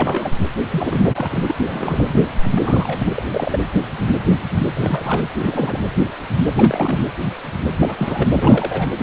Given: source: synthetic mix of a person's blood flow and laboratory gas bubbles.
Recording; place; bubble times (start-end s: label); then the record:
Doppler ultrasound of blood flow; precordium
0.00-0.37 s: bubbles
0.70-1.52 s: bubbles
1.57-2.22 s: bubbles
2.41-2.52 s: bubbles
2.54-3.22 s: bubbles
3.34-3.60 s: bubbles
4.75-5.24 s: bubbles
5.39-5.80 s: bubbles
6.57-7.04 s: bubbles
7.81-8.25 s: bubbles
8.32-8.88 s: bubbles
8.96-9.03 s: bubbles
From the record:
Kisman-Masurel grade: 332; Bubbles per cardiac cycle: rolling drumbeat, 9 or more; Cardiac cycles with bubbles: 50 to 99%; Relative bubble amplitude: moderate (0.250 to 0.450); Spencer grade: 3 (all of the cardiac periods contain showers or single bubble signals, but not dominating or overriding the cardiac motion signals); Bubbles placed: anywhere in the cardiac cycle